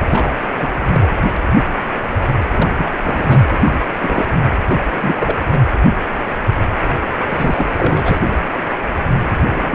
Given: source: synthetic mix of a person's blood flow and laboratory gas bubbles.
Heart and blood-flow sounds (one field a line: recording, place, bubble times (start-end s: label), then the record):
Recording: Doppler ultrasound of blood flow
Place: precordium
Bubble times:
0.09-0.38 s: bubbles
0.56-0.68 s: bubbles
0.92-1.14 s: bubbles
2.51-2.73 s: bubbles
2.78-2.90 s: bubbles
3.03-3.45 s: bubbles
3.51-3.86 s: bubbles
4.02-4.25 s: bubbles
4.69-4.88 s: bubbles
4.96-5.38 s: bubbles
5.51-5.62 s: bubbles
7.28-8.23 s: bubbles
9.46-9.75 s: bubbles
From the record:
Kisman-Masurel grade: 332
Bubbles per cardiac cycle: rolling drumbeat, 9 or more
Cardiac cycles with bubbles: 50 to 99%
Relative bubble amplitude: moderate (0.250 to 0.450)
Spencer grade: 3 (all of the cardiac periods contain showers or single bubble signals, but not dominating or overriding the cardiac motion signals)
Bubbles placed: anywhere in the cardiac cycle